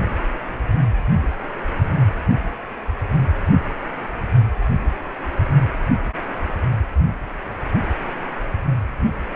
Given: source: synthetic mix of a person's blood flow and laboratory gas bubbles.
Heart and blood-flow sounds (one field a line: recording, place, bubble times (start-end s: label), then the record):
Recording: Doppler ultrasound of blood flow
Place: precordium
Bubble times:
no bubbles
From the record:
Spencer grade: 0 (complete lack of bubble signals)